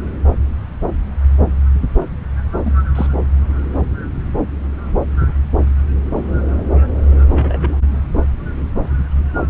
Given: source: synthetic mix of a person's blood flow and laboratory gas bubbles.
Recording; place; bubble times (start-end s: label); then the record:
Doppler ultrasound of blood flow; subclavian vein
2.65-2.72 s: bubbles
2.95-3.07 s: bubbles
7.29-7.79 s: bubbles
From the record:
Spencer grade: 2 (many but less than half of the cardiac periods contain bubble signals, singularly or in groups); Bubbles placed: anywhere in the cardiac cycle